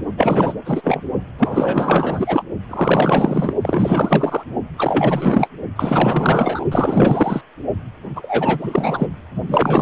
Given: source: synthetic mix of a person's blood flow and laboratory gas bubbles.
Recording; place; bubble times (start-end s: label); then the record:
Doppler ultrasound of blood flow; precordium
0.16-0.54 s: bubbles
0.65-1.02 s: bubbles
1.38-2.43 s: bubbles
2.68-3.53 s: bubbles
3.61-4.43 s: bubbles
4.77-5.49 s: bubbles
5.75-6.65 s: bubbles
6.71-7.44 s: bubbles
8.16-9.08 s: bubbles
9.48-9.82 s: bubbles
From the record:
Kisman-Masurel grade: 444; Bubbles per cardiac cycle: continuous sound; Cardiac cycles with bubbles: 100%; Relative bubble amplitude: maximal (0.775 to 0.999); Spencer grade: 4 (maximum detectable bubble signal sounding continuously throughout systole and diastole of every cardiac period, and overriding the amplitude of the normal cardiac signals); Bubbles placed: only in the low amplitude regions of the cardiac cycle